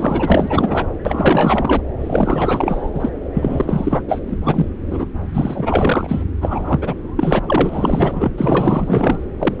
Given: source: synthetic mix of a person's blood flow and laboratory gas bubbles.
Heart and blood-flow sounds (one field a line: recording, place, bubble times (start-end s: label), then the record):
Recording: Doppler ultrasound of blood flow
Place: subclavian vein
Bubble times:
0.00-0.86 s: bubbles
1.05-1.82 s: bubbles
2.00-2.90 s: bubbles
2.94-3.10 s: bubbles
3.33-4.03 s: bubbles
4.08-4.20 s: bubbles
4.27-4.37 s: bubbles
4.44-4.69 s: bubbles
4.89-5.06 s: bubbles
5.33-6.24 s: bubbles
6.41-6.94 s: bubbles
7.16-7.40 s: bubbles
7.46-8.30 s: bubbles
8.37-9.18 s: bubbles
9.39-9.54 s: bubbles
9.58-9.60 s: bubbles
From the record:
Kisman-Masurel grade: 444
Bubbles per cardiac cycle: continuous sound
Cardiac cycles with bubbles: 100%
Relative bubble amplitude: maximal (0.775 to 0.999)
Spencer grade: 4 (maximum detectable bubble signal sounding continuously throughout systole and diastole of every cardiac period, and overriding the amplitude of the normal cardiac signals)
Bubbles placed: anywhere in the cardiac cycle